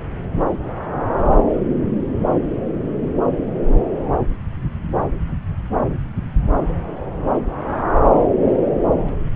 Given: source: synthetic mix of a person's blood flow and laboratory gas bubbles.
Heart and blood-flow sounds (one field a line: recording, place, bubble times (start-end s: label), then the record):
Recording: Doppler ultrasound of blood flow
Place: subclavian vein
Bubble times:
no bubbles
From the record:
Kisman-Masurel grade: 000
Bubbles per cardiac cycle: 0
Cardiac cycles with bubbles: 0%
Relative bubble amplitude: no bubbles discernible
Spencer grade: 0 (complete lack of bubble signals)